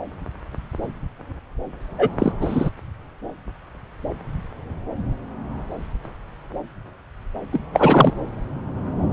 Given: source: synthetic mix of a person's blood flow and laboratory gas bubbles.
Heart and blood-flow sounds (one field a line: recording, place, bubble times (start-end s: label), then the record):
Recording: Doppler ultrasound of blood flow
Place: subclavian vein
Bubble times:
1.98-2.09 s: bubbles
2.19-2.32 s: bubbles
2.41-2.69 s: bubbles
7.53-7.60 s: bubbles
7.73-8.12 s: bubbles
From the record:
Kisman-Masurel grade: 223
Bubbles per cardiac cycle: several, 3 to 8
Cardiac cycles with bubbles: 10 to 50%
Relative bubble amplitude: loud (0.450 to 0.775)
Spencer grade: 2 (many but less than half of the cardiac periods contain bubble signals, singularly or in groups)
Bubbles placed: anywhere in the cardiac cycle